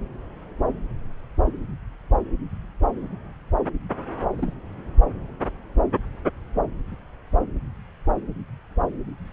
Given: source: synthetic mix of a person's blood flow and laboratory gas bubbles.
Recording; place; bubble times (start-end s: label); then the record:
Doppler ultrasound of blood flow; subclavian vein
4.36-4.53 s: bubbles
From the record:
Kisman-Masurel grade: 111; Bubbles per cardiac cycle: 1 to 2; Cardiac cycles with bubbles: 1 to 10%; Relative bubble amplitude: barely perceptible (0.100 to 0.250); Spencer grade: 1 (occasional bubble signal discernible with the cardiac motion signal, with majority of cardiac periods free of bubbles); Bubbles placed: anywhere in the cardiac cycle